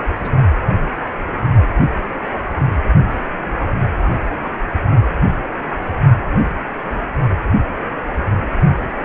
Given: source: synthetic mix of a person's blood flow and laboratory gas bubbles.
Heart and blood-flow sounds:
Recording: Doppler ultrasound of blood flow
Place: precordium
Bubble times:
0.15-0.32 s: bubbles
From the record:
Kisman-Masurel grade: 211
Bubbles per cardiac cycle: several, 3 to 8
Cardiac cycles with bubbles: 1 to 10%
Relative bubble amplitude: barely perceptible (0.100 to 0.250)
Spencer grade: 1 (occasional bubble signal discernible with the cardiac motion signal, with majority of cardiac periods free of bubbles)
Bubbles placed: only in the low amplitude regions of the cardiac cycle

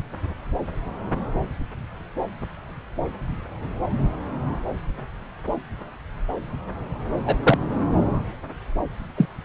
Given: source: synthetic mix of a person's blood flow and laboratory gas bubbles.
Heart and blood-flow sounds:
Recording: Doppler ultrasound of blood flow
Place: subclavian vein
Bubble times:
7.25-7.38 s: bubbles
7.43-7.58 s: bubbles
9.17-9.26 s: bubbles
From the record:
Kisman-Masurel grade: 123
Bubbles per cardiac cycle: 1 to 2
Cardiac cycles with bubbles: 10 to 50%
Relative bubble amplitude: loud (0.450 to 0.775)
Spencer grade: 2 (many but less than half of the cardiac periods contain bubble signals, singularly or in groups)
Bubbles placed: anywhere in the cardiac cycle

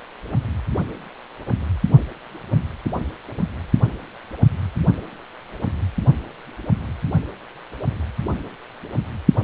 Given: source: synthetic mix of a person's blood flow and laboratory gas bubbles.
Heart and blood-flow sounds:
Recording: Doppler ultrasound of blood flow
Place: precordium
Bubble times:
no bubbles
From the record:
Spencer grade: 0 (complete lack of bubble signals)

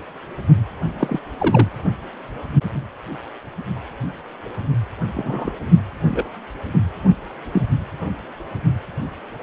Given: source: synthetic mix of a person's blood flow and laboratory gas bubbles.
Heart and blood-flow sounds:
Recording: Doppler ultrasound of blood flow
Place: precordium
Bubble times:
0.99-1.20 s: bubbles
1.38-1.69 s: bubbles
5.14-5.52 s: bubbles
6.09-6.27 s: bubbles
7.53-7.62 s: bubbles
From the record:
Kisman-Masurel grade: 122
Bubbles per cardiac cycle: 1 to 2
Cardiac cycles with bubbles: 10 to 50%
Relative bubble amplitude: moderate (0.250 to 0.450)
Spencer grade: 2 (many but less than half of the cardiac periods contain bubble signals, singularly or in groups)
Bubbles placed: anywhere in the cardiac cycle

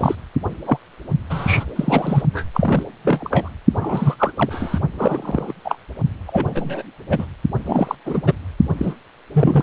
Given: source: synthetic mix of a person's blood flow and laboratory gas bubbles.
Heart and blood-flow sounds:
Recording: Doppler ultrasound of blood flow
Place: precordium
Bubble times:
0.00-0.15 s: bubbles
0.65-0.78 s: bubbles
1.30-1.65 s: bubbles
1.76-2.23 s: bubbles
2.33-2.45 s: bubbles
2.54-2.84 s: bubbles
3.04-3.49 s: bubbles
3.74-4.16 s: bubbles
4.19-4.32 s: bubbles
4.36-4.79 s: bubbles
4.99-5.53 s: bubbles
5.65-5.76 s: bubbles
6.26-6.82 s: bubbles
7.09-7.26 s: bubbles
7.65-7.95 s: bubbles
8.05-8.33 s: bubbles
8.78-8.94 s: bubbles
9.34-9.63 s: bubbles
From the record:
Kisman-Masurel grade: 243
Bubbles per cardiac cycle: several, 3 to 8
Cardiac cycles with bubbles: 100%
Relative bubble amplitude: loud (0.450 to 0.775)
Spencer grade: 3 (all of the cardiac periods contain showers or single bubble signals, but not dominating or overriding the cardiac motion signals)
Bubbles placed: only in the low amplitude regions of the cardiac cycle

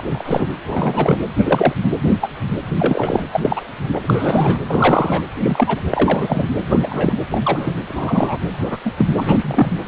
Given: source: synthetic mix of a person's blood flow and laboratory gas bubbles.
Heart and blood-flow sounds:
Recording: Doppler ultrasound of blood flow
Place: precordium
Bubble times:
0.00-0.02 s: bubbles
0.12-0.47 s: bubbles
0.67-1.17 s: bubbles
1.38-1.73 s: bubbles
2.02-2.10 s: bubbles
2.21-2.29 s: bubbles
2.76-3.23 s: bubbles
3.32-3.61 s: bubbles
3.93-4.00 s: bubbles
4.02-4.59 s: bubbles
4.67-5.23 s: bubbles
5.38-5.81 s: bubbles
5.90-6.50 s: bubbles
6.70-7.13 s: bubbles
7.31-7.75 s: bubbles
7.88-8.38 s: bubbles
8.59-8.77 s: bubbles
8.84-8.91 s: bubbles
8.97-9.06 s: bubbles
9.17-9.69 s: bubbles
9.86-9.88 s: bubbles
From the record:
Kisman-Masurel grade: 243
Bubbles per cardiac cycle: several, 3 to 8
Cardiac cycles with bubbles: 100%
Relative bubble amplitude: loud (0.450 to 0.775)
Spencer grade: 3 (all of the cardiac periods contain showers or single bubble signals, but not dominating or overriding the cardiac motion signals)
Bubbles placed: anywhere in the cardiac cycle

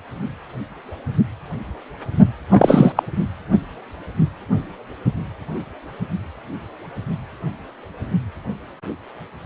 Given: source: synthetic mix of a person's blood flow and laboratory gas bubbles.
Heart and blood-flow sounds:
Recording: Doppler ultrasound of blood flow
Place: precordium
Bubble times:
2.51-2.92 s: bubbles
2.96-3.03 s: bubbles
From the record:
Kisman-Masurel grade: 213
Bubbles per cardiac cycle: several, 3 to 8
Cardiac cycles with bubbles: 1 to 10%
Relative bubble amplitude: loud (0.450 to 0.775)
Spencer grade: 1 (occasional bubble signal discernible with the cardiac motion signal, with majority of cardiac periods free of bubbles)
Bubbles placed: anywhere in the cardiac cycle

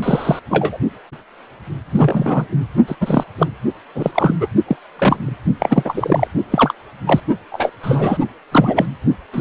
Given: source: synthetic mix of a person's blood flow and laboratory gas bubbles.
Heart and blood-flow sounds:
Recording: Doppler ultrasound of blood flow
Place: precordium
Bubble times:
0.02-0.40 s: bubbles
0.50-0.78 s: bubbles
1.92-2.46 s: bubbles
2.87-2.96 s: bubbles
3.00-3.23 s: bubbles
3.38-3.47 s: bubbles
3.94-4.12 s: bubbles
4.14-4.33 s: bubbles
4.41-4.48 s: bubbles
4.67-4.77 s: bubbles
4.96-5.37 s: bubbles
5.60-6.28 s: bubbles
6.50-6.74 s: bubbles
7.07-7.21 s: bubbles
7.52-7.70 s: bubbles
7.83-8.17 s: bubbles
8.51-8.85 s: bubbles
9.33-9.41 s: bubbles
From the record:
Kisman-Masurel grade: 233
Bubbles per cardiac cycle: several, 3 to 8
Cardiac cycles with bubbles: 50 to 99%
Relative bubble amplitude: loud (0.450 to 0.775)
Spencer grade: 3 (all of the cardiac periods contain showers or single bubble signals, but not dominating or overriding the cardiac motion signals)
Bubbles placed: only in the low amplitude regions of the cardiac cycle

